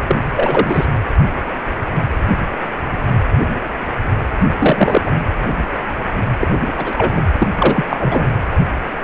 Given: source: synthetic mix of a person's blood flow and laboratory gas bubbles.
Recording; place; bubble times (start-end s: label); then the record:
Doppler ultrasound of blood flow; precordium
0.07-0.17 s: bubbles
0.36-0.86 s: bubbles
4.60-5.02 s: bubbles
5.05-5.12 s: bubbles
6.39-6.47 s: bubbles
6.78-6.93 s: bubbles
6.97-7.12 s: bubbles
7.16-7.21 s: bubbles
7.38-7.47 s: bubbles
7.58-7.85 s: bubbles
7.89-7.97 s: bubbles
7.99-8.26 s: bubbles
From the record:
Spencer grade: 2 (many but less than half of the cardiac periods contain bubble signals, singularly or in groups); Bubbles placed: anywhere in the cardiac cycle